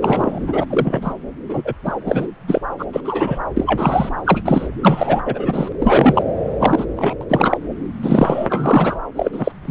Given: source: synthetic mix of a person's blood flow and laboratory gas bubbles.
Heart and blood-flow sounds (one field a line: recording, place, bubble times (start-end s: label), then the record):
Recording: Doppler ultrasound of blood flow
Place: subclavian vein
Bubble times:
0.01-0.65 s: bubbles
0.69-1.15 s: bubbles
1.48-1.62 s: bubbles
1.65-1.74 s: bubbles
1.85-1.96 s: bubbles
2.06-2.27 s: bubbles
2.48-2.61 s: bubbles
2.78-2.85 s: bubbles
2.92-3.00 s: bubbles
3.04-3.38 s: bubbles
3.56-4.09 s: bubbles
4.25-4.41 s: bubbles
4.45-4.67 s: bubbles
4.83-5.21 s: bubbles
5.25-5.70 s: bubbles
5.79-6.24 s: bubbles
6.59-6.85 s: bubbles
6.96-7.16 s: bubbles
7.21-7.24 s: bubbles
7.29-7.58 s: bubbles
8.02-8.47 s: bubbles
8.50-9.00 s: bubbles
9.16-9.52 s: bubbles
9.65-9.71 s: bubbles
From the record:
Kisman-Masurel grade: 243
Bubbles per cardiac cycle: several, 3 to 8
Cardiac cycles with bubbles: 100%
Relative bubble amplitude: loud (0.450 to 0.775)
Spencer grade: 3 (all of the cardiac periods contain showers or single bubble signals, but not dominating or overriding the cardiac motion signals)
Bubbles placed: anywhere in the cardiac cycle